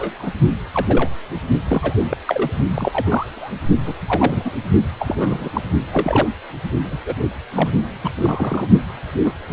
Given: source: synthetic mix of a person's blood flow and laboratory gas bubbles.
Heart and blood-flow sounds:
Doppler ultrasound of blood flow; precordium
0.00-0.31 s: bubbles
0.72-1.10 s: bubbles
1.69-2.04 s: bubbles
2.09-2.17 s: bubbles
2.27-2.54 s: bubbles
2.76-3.51 s: bubbles
3.85-3.94 s: bubbles
4.08-4.50 s: bubbles
4.99-5.49 s: bubbles
5.53-5.61 s: bubbles
5.92-6.27 s: bubbles
6.84-6.98 s: bubbles
7.05-7.15 s: bubbles
7.52-7.72 s: bubbles
8.03-8.11 s: bubbles
8.17-8.68 s: bubbles
9.25-9.32 s: bubbles
From the record:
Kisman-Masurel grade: 242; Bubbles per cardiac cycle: several, 3 to 8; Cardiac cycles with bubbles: 100%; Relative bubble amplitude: moderate (0.250 to 0.450); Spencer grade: 3 (all of the cardiac periods contain showers or single bubble signals, but not dominating or overriding the cardiac motion signals); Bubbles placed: only in the low amplitude regions of the cardiac cycle

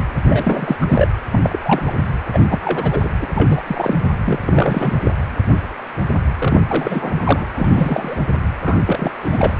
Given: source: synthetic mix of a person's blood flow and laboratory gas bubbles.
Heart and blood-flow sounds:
Doppler ultrasound of blood flow; precordium
0.28-0.76 s: bubbles
0.80-0.85 s: bubbles
0.88-1.08 s: bubbles
1.31-1.39 s: bubbles
1.42-1.59 s: bubbles
1.65-1.82 s: bubbles
1.85-1.92 s: bubbles
2.33-2.39 s: bubbles
2.49-3.10 s: bubbles
3.22-3.27 s: bubbles
3.35-3.64 s: bubbles
3.67-3.95 s: bubbles
4.24-5.00 s: bubbles
5.03-5.11 s: bubbles
6.38-7.45 s: bubbles
7.54-8.18 s: bubbles
8.64-8.78 s: bubbles
8.85-9.11 s: bubbles
9.21-9.54 s: bubbles
From the record:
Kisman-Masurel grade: 332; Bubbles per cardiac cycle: rolling drumbeat, 9 or more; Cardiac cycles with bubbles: 50 to 99%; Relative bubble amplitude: moderate (0.250 to 0.450); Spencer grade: 3 (all of the cardiac periods contain showers or single bubble signals, but not dominating or overriding the cardiac motion signals); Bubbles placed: anywhere in the cardiac cycle

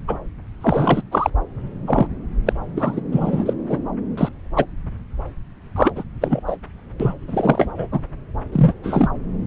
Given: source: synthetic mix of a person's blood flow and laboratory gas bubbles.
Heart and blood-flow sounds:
Doppler ultrasound of blood flow; subclavian vein
0.08-0.17 s: bubbles
0.60-1.02 s: bubbles
1.11-1.30 s: bubbles
1.86-2.07 s: bubbles
2.46-2.53 s: bubbles
2.76-3.00 s: bubbles
3.12-3.54 s: bubbles
3.68-3.79 s: bubbles
4.17-4.29 s: bubbles
4.56-4.66 s: bubbles
5.76-5.92 s: bubbles
5.96-6.04 s: bubbles
6.21-6.41 s: bubbles
6.46-6.57 s: bubbles
7.00-7.13 s: bubbles
7.28-7.88 s: bubbles
7.92-8.00 s: bubbles
8.52-8.72 s: bubbles
8.83-9.09 s: bubbles
From the record:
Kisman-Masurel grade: 233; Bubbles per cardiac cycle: several, 3 to 8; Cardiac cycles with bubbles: 50 to 99%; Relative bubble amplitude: loud (0.450 to 0.775); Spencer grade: 3 (all of the cardiac periods contain showers or single bubble signals, but not dominating or overriding the cardiac motion signals); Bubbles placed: anywhere in the cardiac cycle

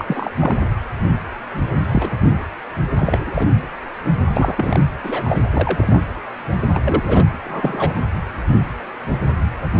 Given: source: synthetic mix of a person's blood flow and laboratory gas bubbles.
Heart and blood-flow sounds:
Doppler ultrasound of blood flow; precordium
0.00-0.30 s: bubbles
0.40-0.55 s: bubbles
0.59-0.67 s: bubbles
1.79-2.11 s: bubbles
2.98-3.31 s: bubbles
3.34-3.47 s: bubbles
4.33-4.79 s: bubbles
5.04-5.42 s: bubbles
5.53-6.01 s: bubbles
6.73-6.81 s: bubbles
6.85-7.25 s: bubbles
7.45-7.94 s: bubbles
From the record:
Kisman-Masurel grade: 222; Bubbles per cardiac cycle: several, 3 to 8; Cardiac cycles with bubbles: 10 to 50%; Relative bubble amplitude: moderate (0.250 to 0.450); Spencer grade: 2 (many but less than half of the cardiac periods contain bubble signals, singularly or in groups); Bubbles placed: anywhere in the cardiac cycle

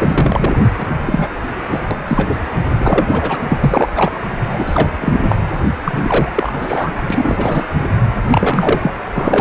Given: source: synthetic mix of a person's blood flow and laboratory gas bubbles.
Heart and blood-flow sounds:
Doppler ultrasound of blood flow; precordium
0.00-0.59 s: bubbles
0.79-0.86 s: bubbles
1.06-1.35 s: bubbles
1.68-1.81 s: bubbles
1.91-1.98 s: bubbles
2.07-2.40 s: bubbles
2.79-3.38 s: bubbles
3.49-3.89 s: bubbles
3.94-4.11 s: bubbles
4.51-4.90 s: bubbles
5.01-5.35 s: bubbles
5.84-6.30 s: bubbles
6.35-7.05 s: bubbles
7.10-7.66 s: bubbles
7.80-7.88 s: bubbles
8.30-8.91 s: bubbles
9.14-9.41 s: bubbles
From the record:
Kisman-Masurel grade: 333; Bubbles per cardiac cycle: rolling drumbeat, 9 or more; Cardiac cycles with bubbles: 50 to 99%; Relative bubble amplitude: loud (0.450 to 0.775); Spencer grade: 3 (all of the cardiac periods contain showers or single bubble signals, but not dominating or overriding the cardiac motion signals); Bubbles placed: anywhere in the cardiac cycle

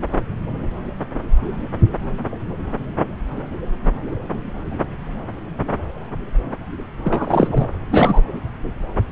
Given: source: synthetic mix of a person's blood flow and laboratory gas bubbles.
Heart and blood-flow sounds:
Doppler ultrasound of blood flow; subclavian vein
7.04-7.68 s: bubbles
7.91-8.22 s: bubbles
From the record:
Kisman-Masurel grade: 213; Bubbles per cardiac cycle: several, 3 to 8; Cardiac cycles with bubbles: 1 to 10%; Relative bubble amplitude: loud (0.450 to 0.775); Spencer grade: 1 (occasional bubble signal discernible with the cardiac motion signal, with majority of cardiac periods free of bubbles); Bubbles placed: anywhere in the cardiac cycle

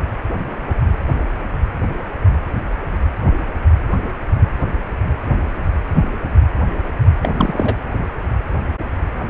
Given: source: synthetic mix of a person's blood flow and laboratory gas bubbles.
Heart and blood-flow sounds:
Doppler ultrasound of blood flow; precordium
7.23-7.76 s: bubbles
From the record:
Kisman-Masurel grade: 222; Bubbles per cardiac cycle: several, 3 to 8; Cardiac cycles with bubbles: 10 to 50%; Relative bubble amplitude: moderate (0.250 to 0.450); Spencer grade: 2 (many but less than half of the cardiac periods contain bubble signals, singularly or in groups); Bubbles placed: anywhere in the cardiac cycle

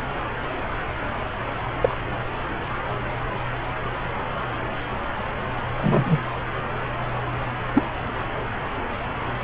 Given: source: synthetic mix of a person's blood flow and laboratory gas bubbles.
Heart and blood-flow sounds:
Doppler ultrasound of blood flow; subclavian vein
1.81-1.97 s: bubbles
5.77-6.19 s: bubbles
7.74-7.84 s: bubbles
From the record:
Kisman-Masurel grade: 113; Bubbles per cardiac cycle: 1 to 2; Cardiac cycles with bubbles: 1 to 10%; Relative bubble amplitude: loud (0.450 to 0.775); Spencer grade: 1 (occasional bubble signal discernible with the cardiac motion signal, with majority of cardiac periods free of bubbles); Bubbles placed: anywhere in the cardiac cycle

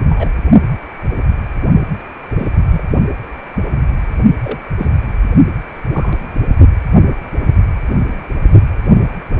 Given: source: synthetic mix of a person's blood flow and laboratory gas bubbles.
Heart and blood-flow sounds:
Doppler ultrasound of blood flow; precordium
0.05-0.29 s: bubbles
2.38-2.49 s: bubbles
2.71-2.83 s: bubbles
4.43-4.59 s: bubbles
4.78-4.88 s: bubbles
5.92-6.16 s: bubbles
From the record:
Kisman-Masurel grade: 122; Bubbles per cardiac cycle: 1 to 2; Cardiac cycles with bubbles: 10 to 50%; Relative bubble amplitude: moderate (0.250 to 0.450); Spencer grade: 2 (many but less than half of the cardiac periods contain bubble signals, singularly or in groups); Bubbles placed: only in the low amplitude regions of the cardiac cycle

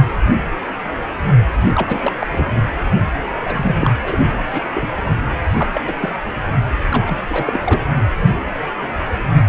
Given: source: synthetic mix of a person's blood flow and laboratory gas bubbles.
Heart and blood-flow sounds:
Doppler ultrasound of blood flow; precordium
1.75-2.12 s: bubbles
2.19-2.27 s: bubbles
2.31-2.63 s: bubbles
3.29-3.76 s: bubbles
3.79-3.91 s: bubbles
4.03-4.43 s: bubbles
4.51-4.64 s: bubbles
4.74-4.91 s: bubbles
5.57-5.70 s: bubbles
5.74-5.80 s: bubbles
5.86-5.96 s: bubbles
6.00-6.11 s: bubbles
6.26-6.30 s: bubbles
6.91-7.17 s: bubbles
7.29-7.59 s: bubbles
7.64-7.83 s: bubbles
From the record:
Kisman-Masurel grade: 232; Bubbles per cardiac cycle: several, 3 to 8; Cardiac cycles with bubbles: 50 to 99%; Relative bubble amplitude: moderate (0.250 to 0.450); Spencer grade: 3 (all of the cardiac periods contain showers or single bubble signals, but not dominating or overriding the cardiac motion signals); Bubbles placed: anywhere in the cardiac cycle

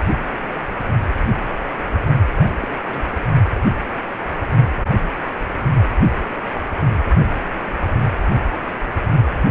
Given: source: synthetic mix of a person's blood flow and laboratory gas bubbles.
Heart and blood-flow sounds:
Doppler ultrasound of blood flow; precordium
2.38-2.53 s: bubbles
2.61-2.69 s: bubbles
2.85-3.06 s: bubbles
From the record:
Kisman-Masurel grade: 221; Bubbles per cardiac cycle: several, 3 to 8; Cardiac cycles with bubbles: 10 to 50%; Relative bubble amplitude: barely perceptible (0.100 to 0.250); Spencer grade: 2 (many but less than half of the cardiac periods contain bubble signals, singularly or in groups); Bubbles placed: anywhere in the cardiac cycle

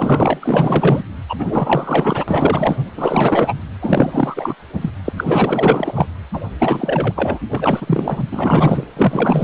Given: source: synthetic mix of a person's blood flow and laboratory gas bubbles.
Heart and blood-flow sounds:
Doppler ultrasound of blood flow; precordium
0.00-1.03 s: bubbles
1.28-2.25 s: bubbles
2.28-2.78 s: bubbles
2.97-3.54 s: bubbles
3.81-4.54 s: bubbles
4.73-4.90 s: bubbles
5.04-5.12 s: bubbles
5.17-6.06 s: bubbles
6.33-6.40 s: bubbles
6.58-7.38 s: bubbles
7.49-8.21 s: bubbles
8.31-8.84 s: bubbles
8.96-9.44 s: bubbles
From the record:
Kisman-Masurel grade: 444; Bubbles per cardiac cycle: continuous sound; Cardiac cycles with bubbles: 100%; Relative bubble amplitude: maximal (0.775 to 0.999); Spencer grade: 4 (maximum detectable bubble signal sounding continuously throughout systole and diastole of every cardiac period, and overriding the amplitude of the normal cardiac signals); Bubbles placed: anywhere in the cardiac cycle

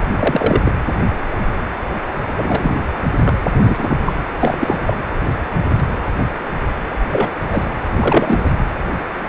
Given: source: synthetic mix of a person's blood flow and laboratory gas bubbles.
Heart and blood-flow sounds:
Doppler ultrasound of blood flow; precordium
0.19-0.72 s: bubbles
2.36-2.76 s: bubbles
3.22-3.37 s: bubbles
3.64-3.97 s: bubbles
4.06-4.12 s: bubbles
4.41-4.81 s: bubbles
4.86-4.94 s: bubbles
7.09-7.36 s: bubbles
7.52-7.63 s: bubbles
7.98-8.54 s: bubbles
From the record:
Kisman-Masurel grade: 223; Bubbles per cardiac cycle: several, 3 to 8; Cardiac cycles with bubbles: 10 to 50%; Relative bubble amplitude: loud (0.450 to 0.775); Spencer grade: 2 (many but less than half of the cardiac periods contain bubble signals, singularly or in groups); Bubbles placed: anywhere in the cardiac cycle

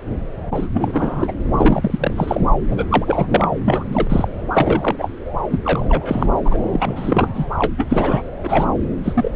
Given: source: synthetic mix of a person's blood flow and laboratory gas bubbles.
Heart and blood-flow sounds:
Doppler ultrasound of blood flow; subclavian vein
0.51-0.68 s: bubbles
0.73-1.32 s: bubbles
1.57-2.40 s: bubbles
2.70-2.85 s: bubbles
2.90-3.46 s: bubbles
3.65-4.28 s: bubbles
4.54-5.10 s: bubbles
5.50-5.59 s: bubbles
5.64-5.86 s: bubbles
5.89-6.27 s: bubbles
6.45-6.58 s: bubbles
6.72-7.28 s: bubbles
7.35-7.45 s: bubbles
7.58-7.74 s: bubbles
7.77-8.22 s: bubbles
8.43-8.66 s: bubbles
9.04-9.31 s: bubbles
From the record:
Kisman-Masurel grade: 333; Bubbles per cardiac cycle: rolling drumbeat, 9 or more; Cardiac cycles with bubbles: 50 to 99%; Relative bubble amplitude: loud (0.450 to 0.775); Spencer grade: 3 (all of the cardiac periods contain showers or single bubble signals, but not dominating or overriding the cardiac motion signals); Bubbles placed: anywhere in the cardiac cycle

